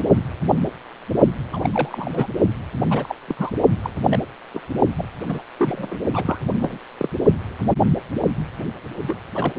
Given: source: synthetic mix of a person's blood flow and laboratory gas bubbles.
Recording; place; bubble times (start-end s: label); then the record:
Doppler ultrasound of blood flow; precordium
1.53-1.69 s: bubbles
1.72-2.27 s: bubbles
2.90-3.15 s: bubbles
3.28-3.35 s: bubbles
3.38-3.50 s: bubbles
3.83-3.90 s: bubbles
4.10-4.20 s: bubbles
4.54-4.60 s: bubbles
4.98-5.05 s: bubbles
5.21-5.42 s: bubbles
5.58-5.97 s: bubbles
6.13-6.39 s: bubbles
6.61-6.78 s: bubbles
6.98-7.09 s: bubbles
9.07-9.15 s: bubbles
9.35-9.53 s: bubbles
9.55-9.58 s: bubbles
From the record:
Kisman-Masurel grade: 232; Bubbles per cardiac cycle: several, 3 to 8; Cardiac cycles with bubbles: 50 to 99%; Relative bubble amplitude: moderate (0.250 to 0.450); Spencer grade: 3 (all of the cardiac periods contain showers or single bubble signals, but not dominating or overriding the cardiac motion signals); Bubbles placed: only in the low amplitude regions of the cardiac cycle